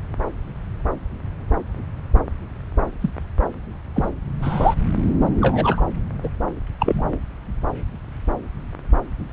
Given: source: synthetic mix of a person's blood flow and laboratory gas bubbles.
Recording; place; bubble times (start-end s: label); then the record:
Doppler ultrasound of blood flow; subclavian vein
3.00-3.10 s: bubbles
3.95-4.09 s: bubbles
4.42-4.75 s: bubbles
5.40-5.82 s: bubbles
6.22-6.29 s: bubbles
6.79-7.17 s: bubbles
From the record:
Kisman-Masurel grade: 122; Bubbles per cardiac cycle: 1 to 2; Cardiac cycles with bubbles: 10 to 50%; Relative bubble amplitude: moderate (0.250 to 0.450); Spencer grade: 2 (many but less than half of the cardiac periods contain bubble signals, singularly or in groups); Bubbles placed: anywhere in the cardiac cycle